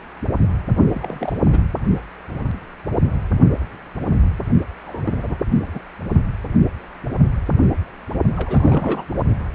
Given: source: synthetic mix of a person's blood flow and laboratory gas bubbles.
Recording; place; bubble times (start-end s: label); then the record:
Doppler ultrasound of blood flow; precordium
0.91-1.38 s: bubbles
1.50-1.58 s: bubbles
4.87-5.37 s: bubbles
5.62-5.79 s: bubbles
8.37-9.04 s: bubbles
9.18-9.22 s: bubbles
From the record:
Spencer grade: 2 (many but less than half of the cardiac periods contain bubble signals, singularly or in groups); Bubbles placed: only in the low amplitude regions of the cardiac cycle